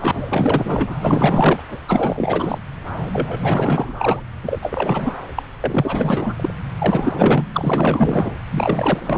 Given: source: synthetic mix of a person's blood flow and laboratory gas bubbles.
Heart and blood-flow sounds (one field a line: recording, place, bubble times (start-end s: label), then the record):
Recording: Doppler ultrasound of blood flow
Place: subclavian vein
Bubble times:
0.00-0.95 s: bubbles
1.01-1.64 s: bubbles
1.68-1.78 s: bubbles
1.88-2.58 s: bubbles
3.12-4.20 s: bubbles
4.43-4.59 s: bubbles
4.62-5.14 s: bubbles
5.35-5.43 s: bubbles
5.63-6.54 s: bubbles
6.78-7.45 s: bubbles
7.52-8.32 s: bubbles
8.51-9.17 s: bubbles
From the record:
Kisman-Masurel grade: 444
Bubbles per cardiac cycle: continuous sound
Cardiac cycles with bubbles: 100%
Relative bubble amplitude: maximal (0.775 to 0.999)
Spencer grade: 4 (maximum detectable bubble signal sounding continuously throughout systole and diastole of every cardiac period, and overriding the amplitude of the normal cardiac signals)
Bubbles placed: anywhere in the cardiac cycle